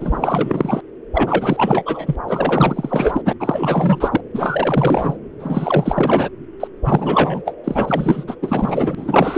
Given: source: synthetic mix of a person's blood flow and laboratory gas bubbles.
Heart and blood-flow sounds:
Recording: Doppler ultrasound of blood flow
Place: subclavian vein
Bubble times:
0.00-0.82 s: bubbles
1.13-2.16 s: bubbles
2.27-3.21 s: bubbles
3.25-3.33 s: bubbles
3.40-4.20 s: bubbles
4.33-5.17 s: bubbles
5.39-6.29 s: bubbles
6.59-6.67 s: bubbles
6.84-7.42 s: bubbles
7.45-7.54 s: bubbles
7.64-8.25 s: bubbles
8.27-8.36 s: bubbles
8.42-9.37 s: bubbles
From the record:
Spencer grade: 4 (maximum detectable bubble signal sounding continuously throughout systole and diastole of every cardiac period, and overriding the amplitude of the normal cardiac signals)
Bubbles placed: anywhere in the cardiac cycle

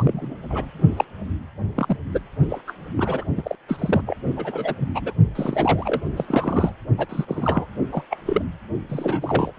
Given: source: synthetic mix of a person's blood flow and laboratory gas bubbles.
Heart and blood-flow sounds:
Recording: Doppler ultrasound of blood flow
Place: precordium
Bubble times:
0.00-0.36 s: bubbles
0.50-0.66 s: bubbles
0.97-1.05 s: bubbles
1.75-1.97 s: bubbles
2.11-2.20 s: bubbles
2.49-2.61 s: bubbles
2.67-2.74 s: bubbles
2.96-3.25 s: bubbles
3.36-3.55 s: bubbles
3.68-4.01 s: bubbles
4.06-4.17 s: bubbles
4.36-4.75 s: bubbles
4.80-4.88 s: bubbles
4.94-5.12 s: bubbles
5.35-6.01 s: bubbles
6.16-6.72 s: bubbles
6.97-7.06 s: bubbles
7.09-7.25 s: bubbles
7.28-7.67 s: bubbles
7.92-8.03 s: bubbles
8.11-8.18 s: bubbles
8.26-8.42 s: bubbles
8.89-9.53 s: bubbles
From the record:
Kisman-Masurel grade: 242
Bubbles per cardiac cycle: several, 3 to 8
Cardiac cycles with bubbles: 100%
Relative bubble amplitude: moderate (0.250 to 0.450)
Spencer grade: 3 (all of the cardiac periods contain showers or single bubble signals, but not dominating or overriding the cardiac motion signals)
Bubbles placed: only in the low amplitude regions of the cardiac cycle

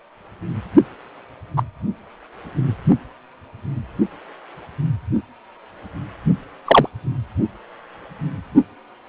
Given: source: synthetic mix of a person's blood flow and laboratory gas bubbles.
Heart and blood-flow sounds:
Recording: Doppler ultrasound of blood flow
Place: precordium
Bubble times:
1.56-1.63 s: bubbles
6.66-6.88 s: bubbles
From the record:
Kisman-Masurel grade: 123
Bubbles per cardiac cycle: 1 to 2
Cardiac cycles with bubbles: 10 to 50%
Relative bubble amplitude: loud (0.450 to 0.775)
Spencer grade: 2 (many but less than half of the cardiac periods contain bubble signals, singularly or in groups)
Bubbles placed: only in the low amplitude regions of the cardiac cycle

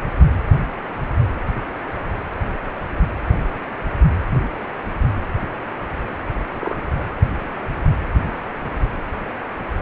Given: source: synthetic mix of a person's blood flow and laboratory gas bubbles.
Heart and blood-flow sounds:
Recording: Doppler ultrasound of blood flow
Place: precordium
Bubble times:
6.59-7.08 s: bubbles
From the record:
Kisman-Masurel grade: 121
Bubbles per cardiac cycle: 1 to 2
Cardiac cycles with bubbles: 10 to 50%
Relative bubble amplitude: barely perceptible (0.100 to 0.250)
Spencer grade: 2 (many but less than half of the cardiac periods contain bubble signals, singularly or in groups)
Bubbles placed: anywhere in the cardiac cycle

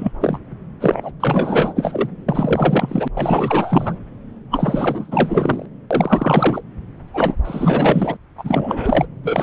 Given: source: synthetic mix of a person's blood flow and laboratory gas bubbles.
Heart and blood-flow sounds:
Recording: Doppler ultrasound of blood flow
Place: subclavian vein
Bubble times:
0.00-0.12 s: bubbles
0.20-0.39 s: bubbles
0.80-1.11 s: bubbles
1.20-2.08 s: bubbles
2.29-3.08 s: bubbles
3.14-3.99 s: bubbles
4.50-5.66 s: bubbles
5.90-6.61 s: bubbles
7.13-7.36 s: bubbles
7.44-8.17 s: bubbles
8.38-9.06 s: bubbles
9.23-9.43 s: bubbles
From the record:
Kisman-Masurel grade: 444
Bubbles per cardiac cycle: continuous sound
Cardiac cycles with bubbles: 100%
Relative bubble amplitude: maximal (0.775 to 0.999)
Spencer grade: 4 (maximum detectable bubble signal sounding continuously throughout systole and diastole of every cardiac period, and overriding the amplitude of the normal cardiac signals)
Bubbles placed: anywhere in the cardiac cycle

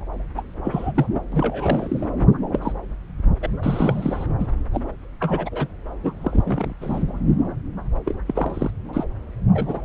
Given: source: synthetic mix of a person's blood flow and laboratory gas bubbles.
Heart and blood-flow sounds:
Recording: Doppler ultrasound of blood flow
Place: subclavian vein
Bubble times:
0.37-0.42 s: bubbles
0.64-0.92 s: bubbles
0.94-1.06 s: bubbles
1.15-1.20 s: bubbles
1.32-2.07 s: bubbles
2.52-2.73 s: bubbles
3.42-3.48 s: bubbles
3.62-4.27 s: bubbles
4.39-4.47 s: bubbles
4.74-4.83 s: bubbles
5.20-5.68 s: bubbles
6.03-6.13 s: bubbles
6.22-6.74 s: bubbles
6.81-7.04 s: bubbles
8.05-8.17 s: bubbles
8.27-8.71 s: bubbles
8.93-9.04 s: bubbles
9.54-9.80 s: bubbles
From the record:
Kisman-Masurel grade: 242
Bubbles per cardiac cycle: several, 3 to 8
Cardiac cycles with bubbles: 100%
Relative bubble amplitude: moderate (0.250 to 0.450)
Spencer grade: 3 (all of the cardiac periods contain showers or single bubble signals, but not dominating or overriding the cardiac motion signals)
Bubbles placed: anywhere in the cardiac cycle

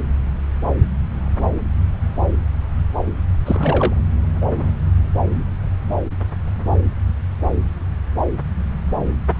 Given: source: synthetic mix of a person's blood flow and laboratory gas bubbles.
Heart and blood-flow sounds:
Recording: Doppler ultrasound of blood flow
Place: subclavian vein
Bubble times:
3.45-3.95 s: bubbles
From the record:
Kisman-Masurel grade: 213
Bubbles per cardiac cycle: several, 3 to 8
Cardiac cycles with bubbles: 1 to 10%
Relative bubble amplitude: loud (0.450 to 0.775)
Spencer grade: 1 (occasional bubble signal discernible with the cardiac motion signal, with majority of cardiac periods free of bubbles)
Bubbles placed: anywhere in the cardiac cycle

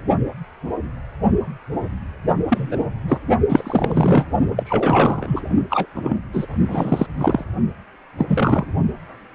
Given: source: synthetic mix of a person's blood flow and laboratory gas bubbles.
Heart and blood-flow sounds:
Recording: Doppler ultrasound of blood flow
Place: precordium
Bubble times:
2.49-2.86 s: bubbles
3.08-3.18 s: bubbles
3.49-4.26 s: bubbles
4.56-5.42 s: bubbles
5.70-5.86 s: bubbles
5.94-6.20 s: bubbles
6.33-6.46 s: bubbles
6.67-7.06 s: bubbles
7.17-7.44 s: bubbles
8.18-8.65 s: bubbles
From the record:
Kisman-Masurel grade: 233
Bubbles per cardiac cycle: several, 3 to 8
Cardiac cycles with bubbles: 50 to 99%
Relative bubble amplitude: loud (0.450 to 0.775)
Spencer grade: 3 (all of the cardiac periods contain showers or single bubble signals, but not dominating or overriding the cardiac motion signals)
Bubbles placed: only in the low amplitude regions of the cardiac cycle

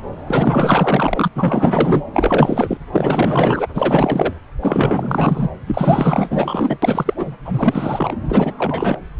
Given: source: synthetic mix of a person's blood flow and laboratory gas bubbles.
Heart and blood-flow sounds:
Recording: Doppler ultrasound of blood flow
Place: subclavian vein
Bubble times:
0.26-1.28 s: bubbles
1.35-2.02 s: bubbles
2.13-2.78 s: bubbles
2.92-3.71 s: bubbles
3.74-4.33 s: bubbles
4.61-5.48 s: bubbles
5.66-6.78 s: bubbles
6.82-7.13 s: bubbles
7.17-7.35 s: bubbles
7.45-8.16 s: bubbles
8.29-8.54 s: bubbles
8.59-8.97 s: bubbles
From the record:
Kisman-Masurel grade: 444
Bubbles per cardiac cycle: continuous sound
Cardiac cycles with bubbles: 100%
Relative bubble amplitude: maximal (0.775 to 0.999)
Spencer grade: 4 (maximum detectable bubble signal sounding continuously throughout systole and diastole of every cardiac period, and overriding the amplitude of the normal cardiac signals)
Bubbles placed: anywhere in the cardiac cycle

